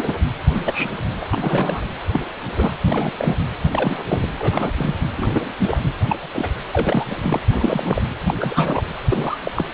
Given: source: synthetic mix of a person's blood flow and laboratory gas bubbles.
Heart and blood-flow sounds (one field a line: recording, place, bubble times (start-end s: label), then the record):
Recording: Doppler ultrasound of blood flow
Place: precordium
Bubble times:
0.00-0.16 s: bubbles
0.54-0.92 s: bubbles
1.21-1.82 s: bubbles
2.13-2.20 s: bubbles
2.56-2.75 s: bubbles
2.86-3.12 s: bubbles
3.19-3.38 s: bubbles
3.71-3.97 s: bubbles
4.08-4.27 s: bubbles
4.38-4.71 s: bubbles
4.75-4.96 s: bubbles
5.16-5.52 s: bubbles
5.59-5.78 s: bubbles
6.08-6.19 s: bubbles
6.21-6.28 s: bubbles
6.33-6.49 s: bubbles
6.71-7.41 s: bubbles
7.50-8.02 s: bubbles
8.26-8.34 s: bubbles
8.40-8.84 s: bubbles
9.09-9.38 s: bubbles
9.45-9.52 s: bubbles
9.56-9.69 s: bubbles
From the record:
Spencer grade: 3 (all of the cardiac periods contain showers or single bubble signals, but not dominating or overriding the cardiac motion signals)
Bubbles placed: anywhere in the cardiac cycle